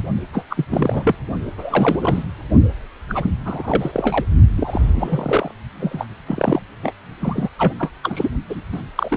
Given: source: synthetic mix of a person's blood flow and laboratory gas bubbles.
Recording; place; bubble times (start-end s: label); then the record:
Doppler ultrasound of blood flow; precordium
0.33-0.43 s: bubbles
0.50-0.65 s: bubbles
0.70-1.15 s: bubbles
1.58-2.23 s: bubbles
3.08-3.30 s: bubbles
3.44-4.25 s: bubbles
4.56-5.51 s: bubbles
5.80-6.04 s: bubbles
6.26-6.61 s: bubbles
6.81-6.92 s: bubbles
7.21-7.48 s: bubbles
7.58-7.74 s: bubbles
7.79-7.90 s: bubbles
8.03-8.29 s: bubbles
8.49-8.61 s: bubbles
8.72-8.82 s: bubbles
8.95-9.17 s: bubbles
From the record:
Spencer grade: 3 (all of the cardiac periods contain showers or single bubble signals, but not dominating or overriding the cardiac motion signals); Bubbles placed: only in the low amplitude regions of the cardiac cycle